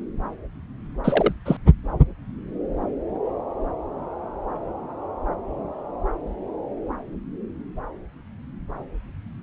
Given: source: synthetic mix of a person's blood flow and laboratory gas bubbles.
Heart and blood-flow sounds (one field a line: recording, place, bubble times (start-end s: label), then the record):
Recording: Doppler ultrasound of blood flow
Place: subclavian vein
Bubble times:
1.04-1.33 s: bubbles
1.46-1.57 s: bubbles
From the record:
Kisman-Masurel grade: 212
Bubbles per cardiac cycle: several, 3 to 8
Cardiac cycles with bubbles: 1 to 10%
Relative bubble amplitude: moderate (0.250 to 0.450)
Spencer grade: 1 (occasional bubble signal discernible with the cardiac motion signal, with majority of cardiac periods free of bubbles)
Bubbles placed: anywhere in the cardiac cycle